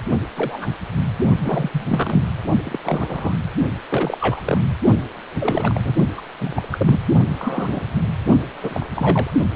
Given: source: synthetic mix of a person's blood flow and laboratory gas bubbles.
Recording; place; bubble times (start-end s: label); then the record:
Doppler ultrasound of blood flow; precordium
0.36-0.70 s: bubbles
1.43-1.85 s: bubbles
1.89-2.23 s: bubbles
2.64-2.80 s: bubbles
2.83-3.33 s: bubbles
3.89-4.40 s: bubbles
4.45-4.58 s: bubbles
5.40-5.80 s: bubbles
5.83-5.94 s: bubbles
6.17-6.21 s: bubbles
6.40-6.53 s: bubbles
6.56-6.69 s: bubbles
6.71-7.01 s: bubbles
7.38-7.80 s: bubbles
8.61-8.86 s: bubbles
8.94-9.30 s: bubbles
From the record:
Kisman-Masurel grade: 242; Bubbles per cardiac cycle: several, 3 to 8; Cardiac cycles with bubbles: 100%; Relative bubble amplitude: moderate (0.250 to 0.450); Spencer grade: 3 (all of the cardiac periods contain showers or single bubble signals, but not dominating or overriding the cardiac motion signals); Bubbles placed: only in the low amplitude regions of the cardiac cycle